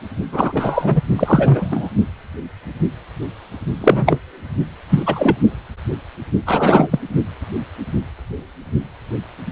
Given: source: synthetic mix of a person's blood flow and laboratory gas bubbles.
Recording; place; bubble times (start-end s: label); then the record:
Doppler ultrasound of blood flow; precordium
0.32-1.01 s: bubbles
1.16-1.89 s: bubbles
3.81-4.18 s: bubbles
4.89-5.03 s: bubbles
5.06-5.36 s: bubbles
6.46-7.00 s: bubbles
From the record:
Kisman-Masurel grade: 223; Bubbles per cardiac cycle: several, 3 to 8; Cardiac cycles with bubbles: 10 to 50%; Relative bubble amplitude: loud (0.450 to 0.775); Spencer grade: 2 (many but less than half of the cardiac periods contain bubble signals, singularly or in groups); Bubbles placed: only in the low amplitude regions of the cardiac cycle